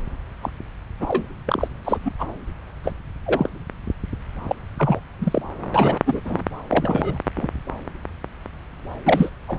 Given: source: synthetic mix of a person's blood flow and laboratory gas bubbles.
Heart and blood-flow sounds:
Doppler ultrasound of blood flow; subclavian vein
0.42-0.49 s: bubbles
0.99-1.24 s: bubbles
1.48-1.68 s: bubbles
1.85-1.98 s: bubbles
2.05-2.11 s: bubbles
2.19-2.24 s: bubbles
2.83-2.92 s: bubbles
3.25-3.49 s: bubbles
4.44-4.55 s: bubbles
4.78-5.00 s: bubbles
5.21-5.42 s: bubbles
5.74-5.99 s: bubbles
6.06-6.21 s: bubbles
6.25-6.43 s: bubbles
6.70-7.19 s: bubbles
7.36-7.50 s: bubbles
9.05-9.30 s: bubbles
9.47-9.59 s: bubbles
From the record:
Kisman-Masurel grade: 232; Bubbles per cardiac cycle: several, 3 to 8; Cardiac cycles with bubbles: 50 to 99%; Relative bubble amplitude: moderate (0.250 to 0.450); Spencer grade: 3 (all of the cardiac periods contain showers or single bubble signals, but not dominating or overriding the cardiac motion signals); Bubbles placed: anywhere in the cardiac cycle

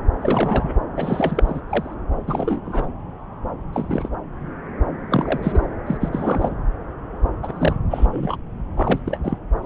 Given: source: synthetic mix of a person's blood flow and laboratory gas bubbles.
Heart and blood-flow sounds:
Doppler ultrasound of blood flow; subclavian vein
0.21-0.73 s: bubbles
0.96-1.60 s: bubbles
1.68-1.95 s: bubbles
2.27-2.60 s: bubbles
2.65-2.88 s: bubbles
3.73-4.08 s: bubbles
5.10-5.67 s: bubbles
5.87-5.97 s: bubbles
6.01-6.09 s: bubbles
6.12-6.56 s: bubbles
7.42-7.74 s: bubbles
7.91-8.37 s: bubbles
8.76-9.00 s: bubbles
9.06-9.18 s: bubbles
9.24-9.37 s: bubbles
9.62-9.66 s: bubbles
From the record:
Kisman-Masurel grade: 232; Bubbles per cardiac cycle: several, 3 to 8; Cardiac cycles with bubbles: 50 to 99%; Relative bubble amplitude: moderate (0.250 to 0.450); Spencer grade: 3 (all of the cardiac periods contain showers or single bubble signals, but not dominating or overriding the cardiac motion signals); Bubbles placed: anywhere in the cardiac cycle

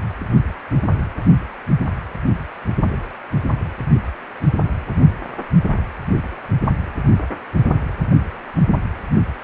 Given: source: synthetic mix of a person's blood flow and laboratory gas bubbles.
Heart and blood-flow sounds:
Doppler ultrasound of blood flow; precordium
no bubbles
From the record:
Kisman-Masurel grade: 000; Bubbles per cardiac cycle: 0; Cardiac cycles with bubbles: 0%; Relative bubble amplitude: no bubbles discernible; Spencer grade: 0 (complete lack of bubble signals)

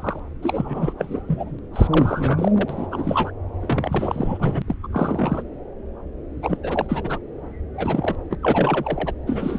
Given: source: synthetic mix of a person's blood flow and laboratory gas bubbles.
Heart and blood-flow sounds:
Doppler ultrasound of blood flow; subclavian vein
0.00-0.20 s: bubbles
0.42-0.93 s: bubbles
0.98-1.22 s: bubbles
1.27-1.59 s: bubbles
1.73-1.88 s: bubbles
1.91-3.31 s: bubbles
3.60-4.62 s: bubbles
4.68-4.76 s: bubbles
4.83-4.88 s: bubbles
4.92-5.43 s: bubbles
6.43-6.57 s: bubbles
6.63-7.19 s: bubbles
7.74-8.16 s: bubbles
8.30-8.35 s: bubbles
8.43-9.12 s: bubbles
9.27-9.59 s: bubbles
From the record:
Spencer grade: 3 (all of the cardiac periods contain showers or single bubble signals, but not dominating or overriding the cardiac motion signals); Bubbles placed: anywhere in the cardiac cycle

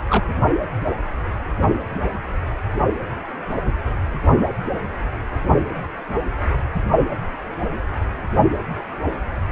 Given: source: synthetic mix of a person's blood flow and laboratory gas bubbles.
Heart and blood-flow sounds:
Doppler ultrasound of blood flow; precordium
0.10-0.24 s: bubbles
From the record:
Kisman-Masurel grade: 212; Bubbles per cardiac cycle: several, 3 to 8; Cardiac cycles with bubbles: 1 to 10%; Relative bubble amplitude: moderate (0.250 to 0.450); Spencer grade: 1 (occasional bubble signal discernible with the cardiac motion signal, with majority of cardiac periods free of bubbles); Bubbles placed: only in the low amplitude regions of the cardiac cycle

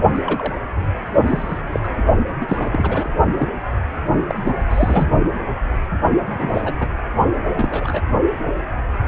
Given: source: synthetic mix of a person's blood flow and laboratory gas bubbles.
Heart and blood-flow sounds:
Doppler ultrasound of blood flow; precordium
0.13-0.66 s: bubbles
1.26-1.59 s: bubbles
1.72-1.80 s: bubbles
1.84-1.89 s: bubbles
2.41-3.11 s: bubbles
3.38-3.50 s: bubbles
4.25-4.66 s: bubbles
4.70-5.09 s: bubbles
6.26-6.62 s: bubbles
6.64-6.73 s: bubbles
6.79-6.88 s: bubbles
7.54-8.02 s: bubbles
From the record:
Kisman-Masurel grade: 232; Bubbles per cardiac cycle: several, 3 to 8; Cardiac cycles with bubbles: 50 to 99%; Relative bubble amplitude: moderate (0.250 to 0.450); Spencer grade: 3 (all of the cardiac periods contain showers or single bubble signals, but not dominating or overriding the cardiac motion signals); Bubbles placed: only in the low amplitude regions of the cardiac cycle

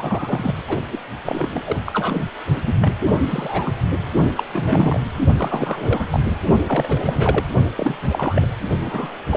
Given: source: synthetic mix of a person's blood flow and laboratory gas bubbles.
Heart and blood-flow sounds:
Doppler ultrasound of blood flow; precordium
0.00-0.55 s: bubbles
0.68-0.81 s: bubbles
0.92-0.99 s: bubbles
1.25-1.61 s: bubbles
1.64-1.76 s: bubbles
1.86-2.26 s: bubbles
2.55-2.62 s: bubbles
2.66-2.93 s: bubbles
3.18-3.75 s: bubbles
3.92-3.96 s: bubbles
4.35-4.43 s: bubbles
4.52-5.00 s: bubbles
5.37-6.07 s: bubbles
6.10-6.20 s: bubbles
6.29-6.37 s: bubbles
6.66-7.44 s: bubbles
7.77-7.96 s: bubbles
8.10-8.48 s: bubbles
8.84-9.12 s: bubbles
9.29-9.37 s: bubbles
From the record:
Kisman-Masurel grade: 342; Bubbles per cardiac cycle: rolling drumbeat, 9 or more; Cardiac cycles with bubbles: 100%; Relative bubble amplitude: moderate (0.250 to 0.450); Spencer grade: 3 (all of the cardiac periods contain showers or single bubble signals, but not dominating or overriding the cardiac motion signals); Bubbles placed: only in the low amplitude regions of the cardiac cycle

